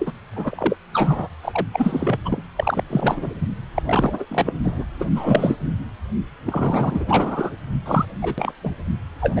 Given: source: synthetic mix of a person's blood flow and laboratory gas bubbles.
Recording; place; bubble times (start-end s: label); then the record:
Doppler ultrasound of blood flow; precordium
0.00-0.12 s: bubbles
0.33-0.76 s: bubbles
0.93-1.27 s: bubbles
1.42-1.67 s: bubbles
1.73-2.19 s: bubbles
2.25-2.42 s: bubbles
2.56-2.83 s: bubbles
2.90-3.48 s: bubbles
3.74-3.82 s: bubbles
3.85-4.25 s: bubbles
4.29-4.53 s: bubbles
4.63-4.83 s: bubbles
4.99-5.05 s: bubbles
5.15-5.55 s: bubbles
6.46-7.55 s: bubbles
7.86-8.05 s: bubbles
8.21-8.34 s: bubbles
8.38-8.53 s: bubbles
8.63-8.70 s: bubbles
9.21-9.40 s: bubbles
From the record:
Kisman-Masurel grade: 342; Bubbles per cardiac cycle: rolling drumbeat, 9 or more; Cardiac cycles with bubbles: 100%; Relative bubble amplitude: moderate (0.250 to 0.450); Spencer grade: 3 (all of the cardiac periods contain showers or single bubble signals, but not dominating or overriding the cardiac motion signals); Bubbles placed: anywhere in the cardiac cycle